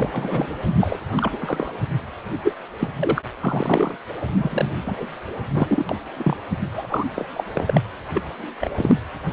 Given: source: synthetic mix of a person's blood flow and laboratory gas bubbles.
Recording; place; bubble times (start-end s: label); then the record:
Doppler ultrasound of blood flow; precordium
0.00-0.09 s: bubbles
0.12-0.54 s: bubbles
0.66-0.74 s: bubbles
0.80-0.97 s: bubbles
1.17-1.38 s: bubbles
1.41-1.72 s: bubbles
2.44-2.54 s: bubbles
2.79-2.88 s: bubbles
2.99-3.21 s: bubbles
3.40-3.96 s: bubbles
4.33-4.71 s: bubbles
4.86-5.06 s: bubbles
5.54-5.85 s: bubbles
5.89-5.96 s: bubbles
6.17-6.37 s: bubbles
6.72-6.86 s: bubbles
6.89-7.04 s: bubbles
7.16-7.28 s: bubbles
7.33-7.44 s: bubbles
7.55-7.81 s: bubbles
8.14-8.22 s: bubbles
8.61-8.71 s: bubbles
8.76-8.94 s: bubbles
From the record:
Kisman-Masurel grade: 242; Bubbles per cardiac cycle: several, 3 to 8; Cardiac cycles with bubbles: 100%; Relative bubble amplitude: moderate (0.250 to 0.450); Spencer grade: 3 (all of the cardiac periods contain showers or single bubble signals, but not dominating or overriding the cardiac motion signals); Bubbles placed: anywhere in the cardiac cycle